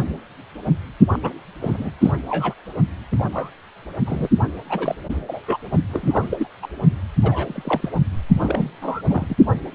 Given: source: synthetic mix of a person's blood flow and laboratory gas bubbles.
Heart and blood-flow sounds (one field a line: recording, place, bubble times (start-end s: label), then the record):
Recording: Doppler ultrasound of blood flow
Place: precordium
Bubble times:
1.13-1.18 s: bubbles
1.22-1.33 s: bubbles
1.61-1.91 s: bubbles
2.00-2.12 s: bubbles
2.29-2.54 s: bubbles
3.12-3.27 s: bubbles
3.32-3.50 s: bubbles
4.05-4.28 s: bubbles
4.69-4.95 s: bubbles
5.28-5.43 s: bubbles
5.47-5.57 s: bubbles
5.93-6.47 s: bubbles
6.61-6.67 s: bubbles
7.23-7.89 s: bubbles
8.39-8.71 s: bubbles
8.81-9.01 s: bubbles
9.08-9.26 s: bubbles
9.29-9.36 s: bubbles
From the record:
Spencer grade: 3 (all of the cardiac periods contain showers or single bubble signals, but not dominating or overriding the cardiac motion signals)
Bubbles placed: only in the low amplitude regions of the cardiac cycle